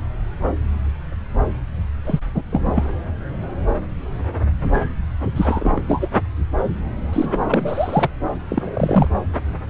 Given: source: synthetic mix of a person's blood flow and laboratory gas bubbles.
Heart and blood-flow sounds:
Doppler ultrasound of blood flow; subclavian vein
2.05-2.19 s: bubbles
2.34-2.42 s: bubbles
2.50-2.94 s: bubbles
5.35-5.82 s: bubbles
5.87-6.08 s: bubbles
7.12-8.10 s: bubbles
8.49-9.08 s: bubbles
From the record:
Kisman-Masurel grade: 222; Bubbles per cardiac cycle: several, 3 to 8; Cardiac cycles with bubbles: 10 to 50%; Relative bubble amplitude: moderate (0.250 to 0.450); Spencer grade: 2 (many but less than half of the cardiac periods contain bubble signals, singularly or in groups); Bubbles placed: anywhere in the cardiac cycle

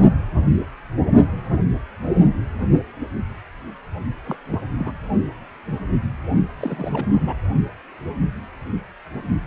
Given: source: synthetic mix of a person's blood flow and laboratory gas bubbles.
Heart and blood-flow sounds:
Doppler ultrasound of blood flow; precordium
4.24-4.37 s: bubbles
4.50-4.58 s: bubbles
4.78-4.92 s: bubbles
6.59-7.34 s: bubbles
From the record:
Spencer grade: 2 (many but less than half of the cardiac periods contain bubble signals, singularly or in groups); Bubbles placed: only in the low amplitude regions of the cardiac cycle

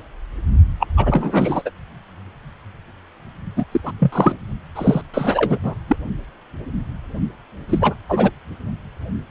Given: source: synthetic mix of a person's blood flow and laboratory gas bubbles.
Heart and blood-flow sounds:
Doppler ultrasound of blood flow; precordium
0.79-0.87 s: bubbles
0.97-1.62 s: bubbles
1.65-1.71 s: bubbles
3.56-3.65 s: bubbles
3.71-3.81 s: bubbles
3.84-3.91 s: bubbles
3.99-4.38 s: bubbles
4.76-5.02 s: bubbles
5.13-5.58 s: bubbles
5.63-5.74 s: bubbles
5.88-5.96 s: bubbles
7.69-7.95 s: bubbles
8.09-8.31 s: bubbles
From the record:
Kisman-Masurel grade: 233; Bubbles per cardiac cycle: several, 3 to 8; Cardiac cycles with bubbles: 50 to 99%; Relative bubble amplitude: loud (0.450 to 0.775); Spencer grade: 3 (all of the cardiac periods contain showers or single bubble signals, but not dominating or overriding the cardiac motion signals); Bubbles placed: only in the low amplitude regions of the cardiac cycle

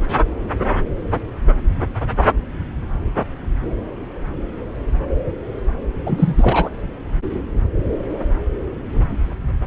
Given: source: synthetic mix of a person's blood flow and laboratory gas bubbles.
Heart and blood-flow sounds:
Doppler ultrasound of blood flow; subclavian vein
6.06-6.69 s: bubbles
From the record:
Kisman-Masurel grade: 223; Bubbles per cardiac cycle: several, 3 to 8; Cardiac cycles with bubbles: 10 to 50%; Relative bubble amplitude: loud (0.450 to 0.775); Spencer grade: 2 (many but less than half of the cardiac periods contain bubble signals, singularly or in groups); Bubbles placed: anywhere in the cardiac cycle

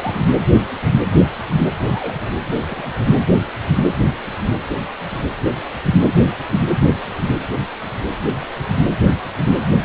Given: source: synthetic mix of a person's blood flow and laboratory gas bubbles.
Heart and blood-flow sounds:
Doppler ultrasound of blood flow; precordium
0.00-0.22 s: bubbles
1.78-2.17 s: bubbles
2.26-2.33 s: bubbles
2.47-2.62 s: bubbles
2.67-3.04 s: bubbles
From the record:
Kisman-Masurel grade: 221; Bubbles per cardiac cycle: several, 3 to 8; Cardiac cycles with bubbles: 10 to 50%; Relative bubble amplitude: barely perceptible (0.100 to 0.250); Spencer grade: 2 (many but less than half of the cardiac periods contain bubble signals, singularly or in groups); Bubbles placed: anywhere in the cardiac cycle

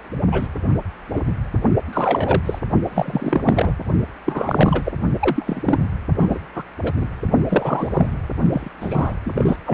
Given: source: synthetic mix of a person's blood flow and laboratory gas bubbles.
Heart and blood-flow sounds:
Doppler ultrasound of blood flow; precordium
0.32-0.47 s: bubbles
1.12-1.23 s: bubbles
1.27-1.32 s: bubbles
1.93-2.42 s: bubbles
2.46-2.59 s: bubbles
2.84-3.73 s: bubbles
4.25-4.92 s: bubbles
5.20-5.88 s: bubbles
6.20-6.39 s: bubbles
6.54-6.63 s: bubbles
6.83-6.92 s: bubbles
6.96-7.07 s: bubbles
7.49-7.90 s: bubbles
7.92-8.06 s: bubbles
8.52-8.69 s: bubbles
8.80-9.13 s: bubbles
9.26-9.31 s: bubbles
9.34-9.59 s: bubbles
9.66-9.74 s: bubbles
From the record:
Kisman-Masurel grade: 242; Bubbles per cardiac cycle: several, 3 to 8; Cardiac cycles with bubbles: 100%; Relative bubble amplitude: moderate (0.250 to 0.450); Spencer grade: 3 (all of the cardiac periods contain showers or single bubble signals, but not dominating or overriding the cardiac motion signals); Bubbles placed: only in the low amplitude regions of the cardiac cycle

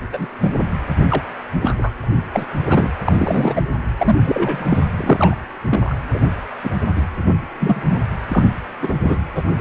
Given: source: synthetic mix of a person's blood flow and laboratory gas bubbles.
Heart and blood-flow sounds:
Doppler ultrasound of blood flow; precordium
0.12-0.28 s: bubbles
0.40-0.52 s: bubbles
1.09-1.23 s: bubbles
1.62-1.75 s: bubbles
1.78-1.91 s: bubbles
2.03-2.07 s: bubbles
2.33-2.46 s: bubbles
2.67-2.90 s: bubbles
3.04-3.63 s: bubbles
3.97-4.86 s: bubbles
4.96-5.36 s: bubbles
5.70-5.94 s: bubbles
6.13-6.19 s: bubbles
6.62-6.71 s: bubbles
6.96-7.05 s: bubbles
7.60-7.98 s: bubbles
8.28-8.50 s: bubbles
8.81-8.93 s: bubbles
9.04-9.18 s: bubbles
9.35-9.43 s: bubbles
9.56-9.61 s: bubbles
From the record:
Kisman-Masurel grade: 232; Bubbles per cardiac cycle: several, 3 to 8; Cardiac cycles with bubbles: 50 to 99%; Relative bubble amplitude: moderate (0.250 to 0.450); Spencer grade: 3 (all of the cardiac periods contain showers or single bubble signals, but not dominating or overriding the cardiac motion signals); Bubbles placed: anywhere in the cardiac cycle

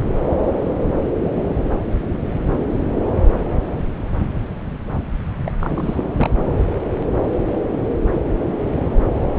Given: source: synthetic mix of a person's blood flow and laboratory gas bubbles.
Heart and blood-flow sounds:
Doppler ultrasound of blood flow; subclavian vein
5.46-5.52 s: bubbles
5.59-6.04 s: bubbles
6.16-6.31 s: bubbles
From the record:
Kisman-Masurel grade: 212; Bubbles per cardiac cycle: several, 3 to 8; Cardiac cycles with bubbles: 1 to 10%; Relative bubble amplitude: moderate (0.250 to 0.450); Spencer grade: 1 (occasional bubble signal discernible with the cardiac motion signal, with majority of cardiac periods free of bubbles); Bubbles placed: anywhere in the cardiac cycle

